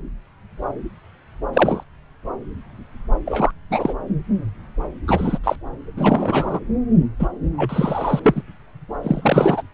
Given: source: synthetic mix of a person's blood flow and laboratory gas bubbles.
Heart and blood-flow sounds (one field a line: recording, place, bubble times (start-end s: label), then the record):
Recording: Doppler ultrasound of blood flow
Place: subclavian vein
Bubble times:
1.53-1.84 s: bubbles
3.25-3.51 s: bubbles
3.70-3.94 s: bubbles
5.07-5.38 s: bubbles
5.43-5.56 s: bubbles
5.96-6.60 s: bubbles
7.20-7.28 s: bubbles
7.58-8.20 s: bubbles
8.23-8.42 s: bubbles
9.03-9.62 s: bubbles
From the record:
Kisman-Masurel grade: 233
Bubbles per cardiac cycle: several, 3 to 8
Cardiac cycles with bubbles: 50 to 99%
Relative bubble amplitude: loud (0.450 to 0.775)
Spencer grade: 3 (all of the cardiac periods contain showers or single bubble signals, but not dominating or overriding the cardiac motion signals)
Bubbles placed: anywhere in the cardiac cycle